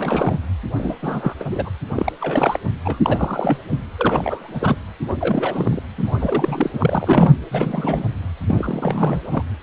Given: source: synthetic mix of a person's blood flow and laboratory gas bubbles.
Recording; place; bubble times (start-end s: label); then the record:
Doppler ultrasound of blood flow; precordium
0.00-0.39 s: bubbles
0.76-0.96 s: bubbles
1.02-1.34 s: bubbles
1.40-1.44 s: bubbles
1.51-1.70 s: bubbles
1.89-2.12 s: bubbles
2.20-2.59 s: bubbles
2.84-2.99 s: bubbles
3.05-3.57 s: bubbles
3.70-3.78 s: bubbles
3.98-4.75 s: bubbles
5.08-5.13 s: bubbles
5.21-5.83 s: bubbles
5.97-6.70 s: bubbles
6.72-7.34 s: bubbles
7.50-8.05 s: bubbles
8.46-9.21 s: bubbles
9.31-9.43 s: bubbles
From the record:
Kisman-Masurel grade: 342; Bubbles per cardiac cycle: rolling drumbeat, 9 or more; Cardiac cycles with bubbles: 100%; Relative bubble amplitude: moderate (0.250 to 0.450); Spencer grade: 3 (all of the cardiac periods contain showers or single bubble signals, but not dominating or overriding the cardiac motion signals); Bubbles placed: anywhere in the cardiac cycle